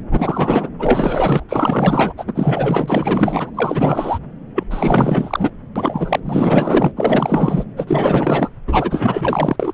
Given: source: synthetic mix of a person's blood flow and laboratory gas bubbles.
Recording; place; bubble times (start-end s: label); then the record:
Doppler ultrasound of blood flow; subclavian vein
0.11-0.70 s: bubbles
0.79-1.44 s: bubbles
1.49-2.13 s: bubbles
2.17-2.25 s: bubbles
2.27-3.50 s: bubbles
3.54-4.19 s: bubbles
4.55-4.64 s: bubbles
4.70-5.50 s: bubbles
5.75-6.20 s: bubbles
6.24-7.64 s: bubbles
7.76-8.49 s: bubbles
8.67-9.56 s: bubbles
9.60-9.72 s: bubbles
From the record:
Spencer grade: 4 (maximum detectable bubble signal sounding continuously throughout systole and diastole of every cardiac period, and overriding the amplitude of the normal cardiac signals); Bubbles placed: anywhere in the cardiac cycle